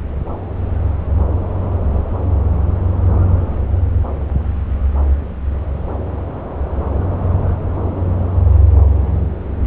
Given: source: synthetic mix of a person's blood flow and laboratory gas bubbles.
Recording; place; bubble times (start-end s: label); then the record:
Doppler ultrasound of blood flow; subclavian vein
no bubbles
From the record:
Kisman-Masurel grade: 000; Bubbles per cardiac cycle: 0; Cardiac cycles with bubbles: 0%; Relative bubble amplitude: no bubbles discernible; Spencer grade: 0 (complete lack of bubble signals)